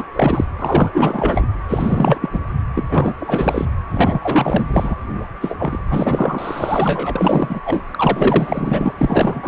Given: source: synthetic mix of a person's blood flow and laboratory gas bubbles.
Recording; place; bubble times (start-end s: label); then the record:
Doppler ultrasound of blood flow; precordium
0.00-0.08 s: bubbles
0.12-0.46 s: bubbles
0.58-0.92 s: bubbles
0.94-1.46 s: bubbles
1.68-2.29 s: bubbles
2.32-2.40 s: bubbles
2.75-2.84 s: bubbles
2.91-3.15 s: bubbles
3.20-3.70 s: bubbles
3.91-4.96 s: bubbles
5.41-5.55 s: bubbles
5.58-5.79 s: bubbles
5.88-7.61 s: bubbles
7.65-7.83 s: bubbles
7.91-8.92 s: bubbles
8.97-9.48 s: bubbles
From the record:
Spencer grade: 4 (maximum detectable bubble signal sounding continuously throughout systole and diastole of every cardiac period, and overriding the amplitude of the normal cardiac signals); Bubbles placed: anywhere in the cardiac cycle